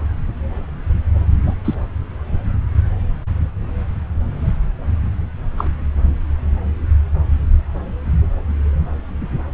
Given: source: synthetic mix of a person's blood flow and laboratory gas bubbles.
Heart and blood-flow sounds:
Doppler ultrasound of blood flow; subclavian vein
1.46-1.54 s: bubbles
1.65-1.75 s: bubbles
5.57-5.68 s: bubbles
From the record:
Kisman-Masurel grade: 122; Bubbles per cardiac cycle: 1 to 2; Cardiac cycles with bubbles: 10 to 50%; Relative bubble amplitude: moderate (0.250 to 0.450); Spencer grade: 2 (many but less than half of the cardiac periods contain bubble signals, singularly or in groups); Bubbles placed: anywhere in the cardiac cycle

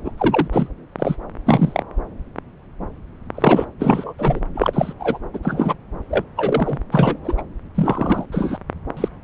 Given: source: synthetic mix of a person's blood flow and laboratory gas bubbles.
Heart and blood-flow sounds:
Doppler ultrasound of blood flow; subclavian vein
0.04-0.11 s: bubbles
0.17-0.48 s: bubbles
0.53-0.69 s: bubbles
0.98-1.16 s: bubbles
1.46-1.84 s: bubbles
3.34-3.66 s: bubbles
3.79-4.14 s: bubbles
4.18-4.40 s: bubbles
4.54-4.93 s: bubbles
4.99-5.18 s: bubbles
5.33-5.40 s: bubbles
5.42-5.74 s: bubbles
6.10-6.24 s: bubbles
6.36-6.77 s: bubbles
6.92-7.17 s: bubbles
7.24-7.42 s: bubbles
7.75-8.26 s: bubbles
8.32-8.58 s: bubbles
8.96-9.09 s: bubbles
From the record:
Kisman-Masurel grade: 233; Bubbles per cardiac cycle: several, 3 to 8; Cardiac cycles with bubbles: 50 to 99%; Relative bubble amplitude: loud (0.450 to 0.775); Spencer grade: 3 (all of the cardiac periods contain showers or single bubble signals, but not dominating or overriding the cardiac motion signals); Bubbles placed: anywhere in the cardiac cycle

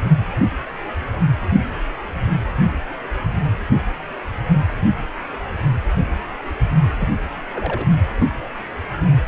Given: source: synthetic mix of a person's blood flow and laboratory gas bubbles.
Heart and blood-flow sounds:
Doppler ultrasound of blood flow; precordium
7.00-7.08 s: bubbles
7.54-7.87 s: bubbles
8.21-8.25 s: bubbles
From the record:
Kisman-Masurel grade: 122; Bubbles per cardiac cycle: 1 to 2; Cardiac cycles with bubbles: 10 to 50%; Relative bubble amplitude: moderate (0.250 to 0.450); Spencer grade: 2 (many but less than half of the cardiac periods contain bubble signals, singularly or in groups); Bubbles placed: anywhere in the cardiac cycle

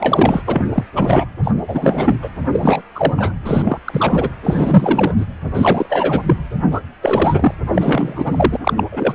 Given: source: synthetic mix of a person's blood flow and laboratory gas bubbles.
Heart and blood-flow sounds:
Doppler ultrasound of blood flow; precordium
0.00-0.42 s: bubbles
0.47-0.68 s: bubbles
0.73-0.83 s: bubbles
0.96-1.26 s: bubbles
1.44-1.51 s: bubbles
1.68-2.16 s: bubbles
2.21-2.29 s: bubbles
2.53-2.82 s: bubbles
2.95-3.13 s: bubbles
3.17-3.33 s: bubbles
3.46-3.79 s: bubbles
3.84-4.29 s: bubbles
4.43-5.12 s: bubbles
5.17-5.25 s: bubbles
5.54-5.86 s: bubbles
5.89-6.23 s: bubbles
6.26-6.38 s: bubbles
6.71-6.81 s: bubbles
7.01-7.54 s: bubbles
7.74-8.57 s: bubbles
8.62-8.73 s: bubbles
8.77-8.84 s: bubbles
8.92-9.15 s: bubbles
From the record:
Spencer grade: 3 (all of the cardiac periods contain showers or single bubble signals, but not dominating or overriding the cardiac motion signals); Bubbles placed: anywhere in the cardiac cycle

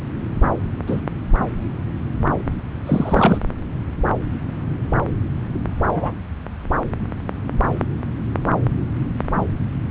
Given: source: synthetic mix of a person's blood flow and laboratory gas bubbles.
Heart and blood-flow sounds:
Doppler ultrasound of blood flow; subclavian vein
0.87-1.01 s: bubbles
2.86-3.38 s: bubbles
5.66-6.14 s: bubbles
From the record:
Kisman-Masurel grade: 123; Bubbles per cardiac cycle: 1 to 2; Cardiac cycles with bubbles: 10 to 50%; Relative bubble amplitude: loud (0.450 to 0.775); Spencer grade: 2 (many but less than half of the cardiac periods contain bubble signals, singularly or in groups); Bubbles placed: anywhere in the cardiac cycle

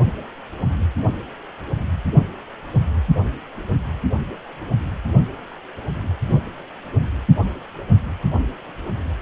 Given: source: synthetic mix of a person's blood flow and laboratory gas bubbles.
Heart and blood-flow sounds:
Doppler ultrasound of blood flow; precordium
no bubbles
From the record:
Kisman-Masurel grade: 000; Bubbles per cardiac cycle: 0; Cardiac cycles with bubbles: 0%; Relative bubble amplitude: no bubbles discernible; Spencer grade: 0 (complete lack of bubble signals)

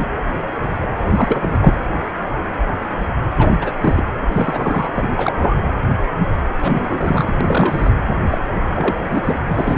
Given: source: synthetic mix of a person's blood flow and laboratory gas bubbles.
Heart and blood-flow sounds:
Doppler ultrasound of blood flow; precordium
0.00-0.06 s: bubbles
1.03-1.50 s: bubbles
1.59-1.74 s: bubbles
3.35-3.52 s: bubbles
3.60-3.73 s: bubbles
3.80-4.04 s: bubbles
4.33-4.90 s: bubbles
4.96-5.33 s: bubbles
5.37-5.55 s: bubbles
6.62-7.33 s: bubbles
7.41-7.94 s: bubbles
8.29-8.38 s: bubbles
8.55-8.60 s: bubbles
8.76-9.36 s: bubbles
9.47-9.77 s: bubbles
From the record:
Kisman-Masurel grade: 332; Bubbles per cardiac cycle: rolling drumbeat, 9 or more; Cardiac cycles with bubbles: 50 to 99%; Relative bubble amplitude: moderate (0.250 to 0.450); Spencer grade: 3 (all of the cardiac periods contain showers or single bubble signals, but not dominating or overriding the cardiac motion signals); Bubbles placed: anywhere in the cardiac cycle

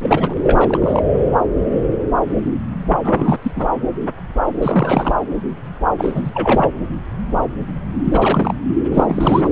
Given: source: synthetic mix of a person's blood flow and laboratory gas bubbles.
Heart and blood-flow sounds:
Doppler ultrasound of blood flow; subclavian vein
0.00-0.34 s: bubbles
0.43-1.02 s: bubbles
3.02-3.37 s: bubbles
3.42-3.52 s: bubbles
3.56-3.67 s: bubbles
4.62-5.13 s: bubbles
5.98-6.71 s: bubbles
8.04-8.54 s: bubbles
8.91-9.51 s: bubbles
From the record:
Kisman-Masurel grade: 332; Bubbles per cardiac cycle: rolling drumbeat, 9 or more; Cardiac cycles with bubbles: 50 to 99%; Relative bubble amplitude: moderate (0.250 to 0.450); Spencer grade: 3 (all of the cardiac periods contain showers or single bubble signals, but not dominating or overriding the cardiac motion signals); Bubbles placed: anywhere in the cardiac cycle

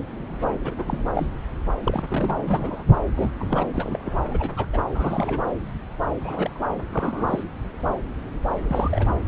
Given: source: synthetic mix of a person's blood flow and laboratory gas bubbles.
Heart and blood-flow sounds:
Doppler ultrasound of blood flow; subclavian vein
0.64-0.74 s: bubbles
0.79-0.84 s: bubbles
0.86-1.04 s: bubbles
1.15-1.27 s: bubbles
1.84-2.84 s: bubbles
3.16-3.32 s: bubbles
3.38-3.68 s: bubbles
3.73-4.12 s: bubbles
4.30-4.50 s: bubbles
4.56-4.66 s: bubbles
4.73-4.83 s: bubbles
4.94-5.41 s: bubbles
6.21-6.61 s: bubbles
6.90-7.43 s: bubbles
8.67-9.19 s: bubbles
From the record:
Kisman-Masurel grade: 232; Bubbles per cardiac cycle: several, 3 to 8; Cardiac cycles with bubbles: 50 to 99%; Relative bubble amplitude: moderate (0.250 to 0.450); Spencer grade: 3 (all of the cardiac periods contain showers or single bubble signals, but not dominating or overriding the cardiac motion signals); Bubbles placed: anywhere in the cardiac cycle

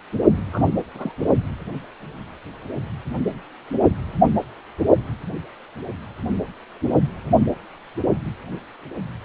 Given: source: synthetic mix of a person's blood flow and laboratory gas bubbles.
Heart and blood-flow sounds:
Doppler ultrasound of blood flow; precordium
0.36-0.81 s: bubbles
0.94-1.12 s: bubbles
From the record:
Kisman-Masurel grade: 211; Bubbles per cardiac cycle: several, 3 to 8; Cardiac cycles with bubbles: 1 to 10%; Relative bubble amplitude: barely perceptible (0.100 to 0.250); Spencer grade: 1 (occasional bubble signal discernible with the cardiac motion signal, with majority of cardiac periods free of bubbles); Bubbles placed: only in the low amplitude regions of the cardiac cycle

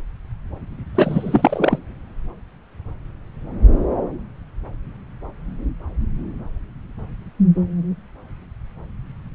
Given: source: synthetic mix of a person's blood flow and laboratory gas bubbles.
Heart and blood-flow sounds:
Doppler ultrasound of blood flow; subclavian vein
0.94-1.79 s: bubbles
From the record:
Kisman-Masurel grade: 213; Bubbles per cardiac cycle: several, 3 to 8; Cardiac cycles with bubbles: 1 to 10%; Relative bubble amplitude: loud (0.450 to 0.775); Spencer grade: 1 (occasional bubble signal discernible with the cardiac motion signal, with majority of cardiac periods free of bubbles); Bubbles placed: anywhere in the cardiac cycle

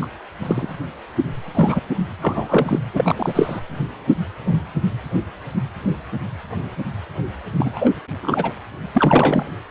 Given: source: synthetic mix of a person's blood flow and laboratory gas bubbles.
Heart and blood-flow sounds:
Doppler ultrasound of blood flow; precordium
0.00-0.06 s: bubbles
0.40-0.76 s: bubbles
1.54-1.80 s: bubbles
2.22-2.79 s: bubbles
2.93-3.61 s: bubbles
7.58-7.91 s: bubbles
8.22-8.54 s: bubbles
8.94-9.44 s: bubbles
From the record:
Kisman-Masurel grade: 223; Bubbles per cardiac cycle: several, 3 to 8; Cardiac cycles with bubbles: 10 to 50%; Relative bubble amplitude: loud (0.450 to 0.775); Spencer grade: 2 (many but less than half of the cardiac periods contain bubble signals, singularly or in groups); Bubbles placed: anywhere in the cardiac cycle

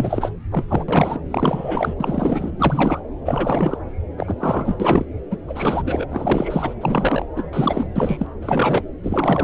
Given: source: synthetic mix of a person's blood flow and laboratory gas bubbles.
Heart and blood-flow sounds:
Doppler ultrasound of blood flow; subclavian vein
0.00-0.31 s: bubbles
0.52-0.66 s: bubbles
0.68-0.84 s: bubbles
0.88-1.20 s: bubbles
1.30-1.94 s: bubbles
2.00-2.51 s: bubbles
2.58-3.00 s: bubbles
3.25-3.77 s: bubbles
4.17-4.34 s: bubbles
4.40-4.76 s: bubbles
4.79-5.05 s: bubbles
5.30-5.37 s: bubbles
5.48-6.05 s: bubbles
6.10-6.74 s: bubbles
6.81-7.25 s: bubbles
7.36-7.43 s: bubbles
7.52-7.87 s: bubbles
7.96-8.28 s: bubbles
8.41-8.83 s: bubbles
9.03-9.44 s: bubbles
From the record:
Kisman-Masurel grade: 342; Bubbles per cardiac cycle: rolling drumbeat, 9 or more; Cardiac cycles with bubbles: 100%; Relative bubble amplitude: moderate (0.250 to 0.450); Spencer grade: 3 (all of the cardiac periods contain showers or single bubble signals, but not dominating or overriding the cardiac motion signals); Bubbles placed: anywhere in the cardiac cycle

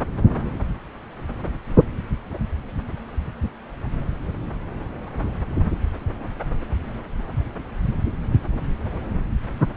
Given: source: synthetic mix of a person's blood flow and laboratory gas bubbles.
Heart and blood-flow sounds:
Doppler ultrasound of blood flow; subclavian vein
no bubbles
From the record:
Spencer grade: 0 (complete lack of bubble signals)

